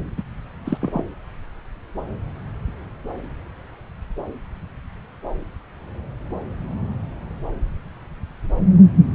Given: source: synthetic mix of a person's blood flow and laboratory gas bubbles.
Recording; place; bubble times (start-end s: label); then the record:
Doppler ultrasound of blood flow; subclavian vein
0.17-0.23 s: bubbles
0.65-0.78 s: bubbles
0.82-1.05 s: bubbles
From the record:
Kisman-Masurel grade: 212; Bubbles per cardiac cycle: several, 3 to 8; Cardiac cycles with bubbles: 1 to 10%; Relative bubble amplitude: moderate (0.250 to 0.450); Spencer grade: 1 (occasional bubble signal discernible with the cardiac motion signal, with majority of cardiac periods free of bubbles); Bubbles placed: anywhere in the cardiac cycle